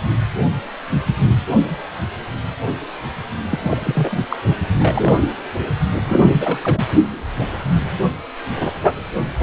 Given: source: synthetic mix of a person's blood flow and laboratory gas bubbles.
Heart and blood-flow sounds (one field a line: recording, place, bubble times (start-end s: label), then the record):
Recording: Doppler ultrasound of blood flow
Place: precordium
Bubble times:
3.50-3.59 s: bubbles
3.63-4.18 s: bubbles
4.29-4.37 s: bubbles
4.79-5.22 s: bubbles
6.08-6.21 s: bubbles
6.31-6.87 s: bubbles
From the record:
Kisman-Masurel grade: 232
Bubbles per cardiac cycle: several, 3 to 8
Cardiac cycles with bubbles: 50 to 99%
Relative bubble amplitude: moderate (0.250 to 0.450)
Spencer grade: 3 (all of the cardiac periods contain showers or single bubble signals, but not dominating or overriding the cardiac motion signals)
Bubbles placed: only in the low amplitude regions of the cardiac cycle